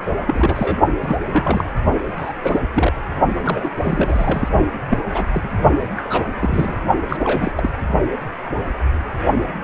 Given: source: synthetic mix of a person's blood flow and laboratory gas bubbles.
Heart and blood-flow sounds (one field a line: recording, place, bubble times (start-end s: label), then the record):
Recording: Doppler ultrasound of blood flow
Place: precordium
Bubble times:
0.27-0.77 s: bubbles
1.00-1.16 s: bubbles
1.31-1.65 s: bubbles
2.17-2.33 s: bubbles
2.42-2.60 s: bubbles
2.74-2.93 s: bubbles
3.43-3.70 s: bubbles
3.83-4.48 s: bubbles
4.88-4.98 s: bubbles
5.14-5.27 s: bubbles
5.33-5.50 s: bubbles
5.97-6.82 s: bubbles
7.09-7.53 s: bubbles
7.55-7.70 s: bubbles
From the record:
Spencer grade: 3 (all of the cardiac periods contain showers or single bubble signals, but not dominating or overriding the cardiac motion signals)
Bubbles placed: only in the low amplitude regions of the cardiac cycle